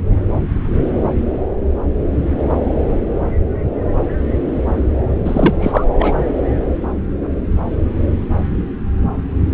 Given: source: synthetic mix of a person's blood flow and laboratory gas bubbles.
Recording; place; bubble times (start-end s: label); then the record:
Doppler ultrasound of blood flow; subclavian vein
5.25-5.84 s: bubbles
5.98-6.12 s: bubbles
From the record:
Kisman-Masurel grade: 213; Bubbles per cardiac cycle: several, 3 to 8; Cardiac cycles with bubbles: 1 to 10%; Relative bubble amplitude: loud (0.450 to 0.775); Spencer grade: 1 (occasional bubble signal discernible with the cardiac motion signal, with majority of cardiac periods free of bubbles); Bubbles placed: anywhere in the cardiac cycle